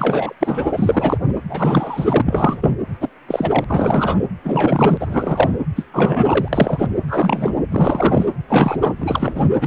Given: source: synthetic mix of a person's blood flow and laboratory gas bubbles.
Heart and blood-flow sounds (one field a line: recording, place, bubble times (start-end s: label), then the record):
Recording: Doppler ultrasound of blood flow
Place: precordium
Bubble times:
0.00-0.33 s: bubbles
0.40-0.72 s: bubbles
0.75-1.17 s: bubbles
1.49-2.21 s: bubbles
2.25-2.58 s: bubbles
2.60-2.71 s: bubbles
3.00-3.09 s: bubbles
3.27-3.65 s: bubbles
3.67-4.22 s: bubbles
4.42-4.97 s: bubbles
5.00-5.51 s: bubbles
5.75-5.86 s: bubbles
5.93-6.49 s: bubbles
6.53-6.87 s: bubbles
7.08-7.56 s: bubbles
7.71-8.26 s: bubbles
8.48-8.93 s: bubbles
9.00-9.48 s: bubbles
9.61-9.67 s: bubbles
From the record:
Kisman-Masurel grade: 343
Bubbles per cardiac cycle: rolling drumbeat, 9 or more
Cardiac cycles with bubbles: 100%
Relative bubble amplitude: loud (0.450 to 0.775)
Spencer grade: 3 (all of the cardiac periods contain showers or single bubble signals, but not dominating or overriding the cardiac motion signals)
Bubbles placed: anywhere in the cardiac cycle